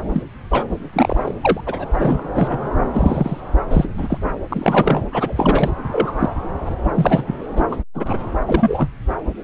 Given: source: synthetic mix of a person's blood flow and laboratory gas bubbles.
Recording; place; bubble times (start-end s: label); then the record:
Doppler ultrasound of blood flow; subclavian vein
0.13-0.23 s: bubbles
0.50-0.68 s: bubbles
0.93-1.34 s: bubbles
1.41-1.60 s: bubbles
1.66-1.85 s: bubbles
1.95-2.27 s: bubbles
2.34-2.58 s: bubbles
2.93-3.41 s: bubbles
3.69-3.89 s: bubbles
3.97-4.18 s: bubbles
4.48-5.04 s: bubbles
5.11-5.70 s: bubbles
5.92-6.11 s: bubbles
6.19-6.32 s: bubbles
6.65-6.69 s: bubbles
6.94-7.23 s: bubbles
7.27-7.35 s: bubbles
7.56-7.62 s: bubbles
7.71-7.77 s: bubbles
7.94-8.18 s: bubbles
8.45-8.89 s: bubbles
From the record:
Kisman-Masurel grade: 233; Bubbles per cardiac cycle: several, 3 to 8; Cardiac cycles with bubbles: 50 to 99%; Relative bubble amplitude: loud (0.450 to 0.775); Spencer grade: 3 (all of the cardiac periods contain showers or single bubble signals, but not dominating or overriding the cardiac motion signals); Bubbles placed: anywhere in the cardiac cycle